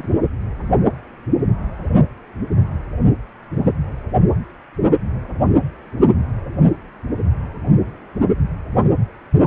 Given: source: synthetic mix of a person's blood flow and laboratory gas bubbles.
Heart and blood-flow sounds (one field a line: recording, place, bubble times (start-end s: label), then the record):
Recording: Doppler ultrasound of blood flow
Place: precordium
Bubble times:
0.00-0.08 s: bubbles
From the record:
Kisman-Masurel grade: 111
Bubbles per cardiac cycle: 1 to 2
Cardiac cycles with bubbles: 1 to 10%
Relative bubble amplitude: barely perceptible (0.100 to 0.250)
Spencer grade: 1 (occasional bubble signal discernible with the cardiac motion signal, with majority of cardiac periods free of bubbles)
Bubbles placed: only in the low amplitude regions of the cardiac cycle